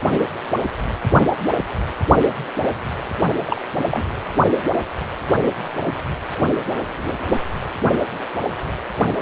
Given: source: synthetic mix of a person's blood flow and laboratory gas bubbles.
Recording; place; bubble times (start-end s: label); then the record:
Doppler ultrasound of blood flow; precordium
3.46-3.60 s: bubbles
3.91-4.05 s: bubbles
From the record:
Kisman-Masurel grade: 112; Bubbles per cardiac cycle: 1 to 2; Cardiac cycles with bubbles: 1 to 10%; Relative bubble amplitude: moderate (0.250 to 0.450); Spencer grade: 1 (occasional bubble signal discernible with the cardiac motion signal, with majority of cardiac periods free of bubbles); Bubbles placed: anywhere in the cardiac cycle